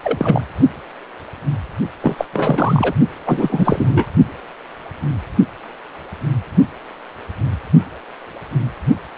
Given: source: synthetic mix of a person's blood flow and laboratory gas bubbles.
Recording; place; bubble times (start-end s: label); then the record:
Doppler ultrasound of blood flow; precordium
0.02-0.45 s: bubbles
2.02-2.15 s: bubbles
2.18-2.25 s: bubbles
2.33-2.94 s: bubbles
3.25-4.08 s: bubbles
From the record:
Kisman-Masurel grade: 333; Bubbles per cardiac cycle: rolling drumbeat, 9 or more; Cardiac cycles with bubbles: 50 to 99%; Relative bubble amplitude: loud (0.450 to 0.775); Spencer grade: 3 (all of the cardiac periods contain showers or single bubble signals, but not dominating or overriding the cardiac motion signals); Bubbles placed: only in the low amplitude regions of the cardiac cycle